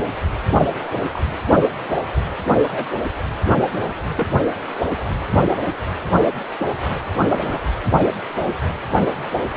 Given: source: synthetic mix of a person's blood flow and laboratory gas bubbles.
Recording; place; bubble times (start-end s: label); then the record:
Doppler ultrasound of blood flow; precordium
1.14-1.26 s: bubbles
2.63-2.88 s: bubbles
4.17-4.27 s: bubbles
7.20-7.62 s: bubbles
7.96-8.08 s: bubbles
From the record:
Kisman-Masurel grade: 121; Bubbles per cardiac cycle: 1 to 2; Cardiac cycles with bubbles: 10 to 50%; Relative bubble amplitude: barely perceptible (0.100 to 0.250); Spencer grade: 2 (many but less than half of the cardiac periods contain bubble signals, singularly or in groups); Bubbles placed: anywhere in the cardiac cycle